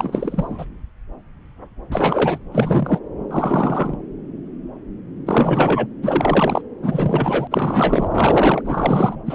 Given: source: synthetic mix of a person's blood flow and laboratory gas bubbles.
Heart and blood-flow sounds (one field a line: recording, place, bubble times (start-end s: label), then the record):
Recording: Doppler ultrasound of blood flow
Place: subclavian vein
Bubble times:
0.00-0.65 s: bubbles
1.92-2.38 s: bubbles
2.52-3.00 s: bubbles
3.31-3.96 s: bubbles
5.26-5.87 s: bubbles
6.03-6.62 s: bubbles
6.82-7.47 s: bubbles
7.51-8.62 s: bubbles
8.65-9.16 s: bubbles
9.26-9.35 s: bubbles
From the record:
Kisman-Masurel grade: 332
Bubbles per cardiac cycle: rolling drumbeat, 9 or more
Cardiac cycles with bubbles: 50 to 99%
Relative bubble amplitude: moderate (0.250 to 0.450)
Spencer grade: 3 (all of the cardiac periods contain showers or single bubble signals, but not dominating or overriding the cardiac motion signals)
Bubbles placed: anywhere in the cardiac cycle